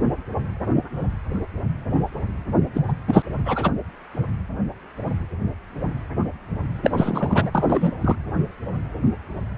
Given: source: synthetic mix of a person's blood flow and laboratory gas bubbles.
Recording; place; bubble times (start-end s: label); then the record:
Doppler ultrasound of blood flow; precordium
2.74-2.81 s: bubbles
2.88-2.92 s: bubbles
3.07-3.22 s: bubbles
3.45-3.71 s: bubbles
6.83-7.50 s: bubbles
7.54-7.92 s: bubbles
8.01-8.16 s: bubbles
From the record:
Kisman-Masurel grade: 223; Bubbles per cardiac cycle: several, 3 to 8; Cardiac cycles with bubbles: 10 to 50%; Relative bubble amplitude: loud (0.450 to 0.775); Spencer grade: 2 (many but less than half of the cardiac periods contain bubble signals, singularly or in groups); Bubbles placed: anywhere in the cardiac cycle